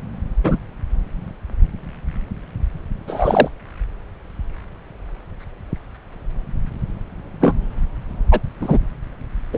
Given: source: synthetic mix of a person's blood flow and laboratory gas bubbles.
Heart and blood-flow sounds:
Doppler ultrasound of blood flow; subclavian vein
0.43-0.57 s: bubbles
3.07-3.48 s: bubbles
7.41-7.55 s: bubbles
8.31-8.40 s: bubbles
8.61-8.78 s: bubbles
9.53-9.58 s: bubbles
From the record:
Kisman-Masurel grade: 123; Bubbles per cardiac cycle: 1 to 2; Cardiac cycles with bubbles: 10 to 50%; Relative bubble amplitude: loud (0.450 to 0.775); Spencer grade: 2 (many but less than half of the cardiac periods contain bubble signals, singularly or in groups); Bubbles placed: anywhere in the cardiac cycle

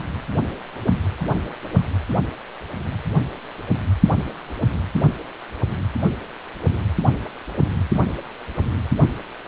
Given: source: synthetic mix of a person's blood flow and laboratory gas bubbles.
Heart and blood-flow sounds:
Doppler ultrasound of blood flow; precordium
4.94-5.00 s: bubbles
5.68-5.74 s: bubbles
From the record:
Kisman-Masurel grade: 111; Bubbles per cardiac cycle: 1 to 2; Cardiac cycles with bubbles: 1 to 10%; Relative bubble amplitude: barely perceptible (0.100 to 0.250); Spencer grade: 1 (occasional bubble signal discernible with the cardiac motion signal, with majority of cardiac periods free of bubbles); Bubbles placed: anywhere in the cardiac cycle

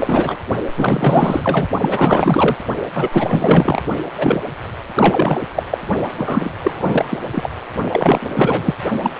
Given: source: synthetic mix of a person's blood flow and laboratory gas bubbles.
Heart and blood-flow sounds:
Doppler ultrasound of blood flow; precordium
0.00-0.38 s: bubbles
0.76-1.67 s: bubbles
1.81-2.56 s: bubbles
2.94-3.82 s: bubbles
4.16-4.41 s: bubbles
4.95-5.40 s: bubbles
5.55-5.63 s: bubbles
5.71-5.78 s: bubbles
6.17-6.50 s: bubbles
6.62-7.19 s: bubbles
7.33-7.50 s: bubbles
7.92-8.74 s: bubbles
9.02-9.10 s: bubbles
From the record:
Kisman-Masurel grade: 444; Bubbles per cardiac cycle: continuous sound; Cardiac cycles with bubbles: 100%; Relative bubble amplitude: maximal (0.775 to 0.999); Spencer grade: 4 (maximum detectable bubble signal sounding continuously throughout systole and diastole of every cardiac period, and overriding the amplitude of the normal cardiac signals); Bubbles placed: only in the low amplitude regions of the cardiac cycle

